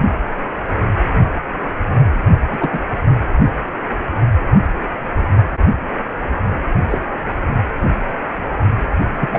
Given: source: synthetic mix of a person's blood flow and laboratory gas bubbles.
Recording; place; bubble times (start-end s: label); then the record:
Doppler ultrasound of blood flow; precordium
2.51-2.80 s: bubbles
6.90-6.98 s: bubbles
9.20-9.39 s: bubbles
From the record:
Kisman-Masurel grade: 122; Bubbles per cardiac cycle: 1 to 2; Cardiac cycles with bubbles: 10 to 50%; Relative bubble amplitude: moderate (0.250 to 0.450); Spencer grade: 2 (many but less than half of the cardiac periods contain bubble signals, singularly or in groups); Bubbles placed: only in the low amplitude regions of the cardiac cycle